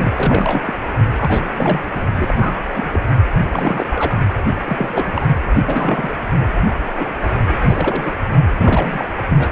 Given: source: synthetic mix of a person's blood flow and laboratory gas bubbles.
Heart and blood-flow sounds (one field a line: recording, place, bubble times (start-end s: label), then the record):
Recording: Doppler ultrasound of blood flow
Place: precordium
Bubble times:
0.00-0.73 s: bubbles
1.20-1.90 s: bubbles
1.93-2.02 s: bubbles
2.16-2.60 s: bubbles
2.73-3.00 s: bubbles
3.39-3.47 s: bubbles
3.50-3.87 s: bubbles
3.90-4.21 s: bubbles
4.65-5.26 s: bubbles
5.66-6.14 s: bubbles
6.40-6.46 s: bubbles
6.97-7.13 s: bubbles
7.47-7.58 s: bubbles
7.61-8.11 s: bubbles
8.57-9.08 s: bubbles
9.30-9.36 s: bubbles
9.38-9.49 s: bubbles
From the record:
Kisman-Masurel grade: 342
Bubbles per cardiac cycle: rolling drumbeat, 9 or more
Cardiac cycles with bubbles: 100%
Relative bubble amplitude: moderate (0.250 to 0.450)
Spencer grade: 3 (all of the cardiac periods contain showers or single bubble signals, but not dominating or overriding the cardiac motion signals)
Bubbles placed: only in the low amplitude regions of the cardiac cycle